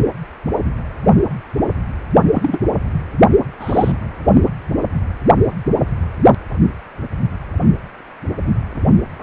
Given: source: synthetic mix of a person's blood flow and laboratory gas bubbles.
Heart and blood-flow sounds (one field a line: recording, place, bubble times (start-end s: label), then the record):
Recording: Doppler ultrasound of blood flow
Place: precordium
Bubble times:
2.33-2.60 s: bubbles
3.60-3.92 s: bubbles
From the record:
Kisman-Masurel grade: 122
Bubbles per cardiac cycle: 1 to 2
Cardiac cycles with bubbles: 10 to 50%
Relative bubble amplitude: moderate (0.250 to 0.450)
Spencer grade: 2 (many but less than half of the cardiac periods contain bubble signals, singularly or in groups)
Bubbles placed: only in the low amplitude regions of the cardiac cycle